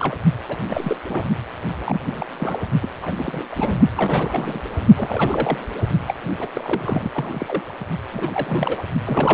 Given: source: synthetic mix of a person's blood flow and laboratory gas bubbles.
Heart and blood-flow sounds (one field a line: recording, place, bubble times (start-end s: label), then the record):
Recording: Doppler ultrasound of blood flow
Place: precordium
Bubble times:
0.00-0.15 s: bubbles
0.48-0.57 s: bubbles
0.68-0.96 s: bubbles
1.09-1.22 s: bubbles
1.85-2.00 s: bubbles
2.06-2.26 s: bubbles
2.40-2.60 s: bubbles
2.82-2.91 s: bubbles
3.01-3.43 s: bubbles
3.51-3.80 s: bubbles
3.92-4.60 s: bubbles
4.95-5.58 s: bubbles
6.07-6.14 s: bubbles
6.38-6.46 s: bubbles
6.54-7.11 s: bubbles
7.14-7.77 s: bubbles
8.12-8.83 s: bubbles
9.06-9.34 s: bubbles
From the record:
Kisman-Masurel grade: 342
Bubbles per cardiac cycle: rolling drumbeat, 9 or more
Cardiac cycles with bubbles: 100%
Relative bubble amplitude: moderate (0.250 to 0.450)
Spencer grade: 3 (all of the cardiac periods contain showers or single bubble signals, but not dominating or overriding the cardiac motion signals)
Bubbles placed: only in the low amplitude regions of the cardiac cycle